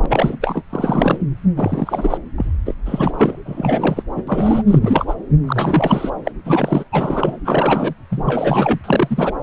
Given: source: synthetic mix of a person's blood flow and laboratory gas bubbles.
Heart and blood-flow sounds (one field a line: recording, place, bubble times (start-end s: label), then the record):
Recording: Doppler ultrasound of blood flow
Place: subclavian vein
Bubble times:
0.02-0.36 s: bubbles
0.42-0.63 s: bubbles
0.69-1.18 s: bubbles
1.56-2.17 s: bubbles
2.37-2.46 s: bubbles
2.65-2.74 s: bubbles
2.85-3.39 s: bubbles
3.46-4.02 s: bubbles
4.16-4.24 s: bubbles
4.27-4.62 s: bubbles
4.67-5.14 s: bubbles
5.46-6.09 s: bubbles
6.25-6.31 s: bubbles
6.44-6.84 s: bubbles
6.92-7.37 s: bubbles
7.45-7.94 s: bubbles
8.10-8.79 s: bubbles
8.84-9.32 s: bubbles
From the record:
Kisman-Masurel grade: 343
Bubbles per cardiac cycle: rolling drumbeat, 9 or more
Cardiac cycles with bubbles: 100%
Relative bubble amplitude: loud (0.450 to 0.775)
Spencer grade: 3 (all of the cardiac periods contain showers or single bubble signals, but not dominating or overriding the cardiac motion signals)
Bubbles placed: anywhere in the cardiac cycle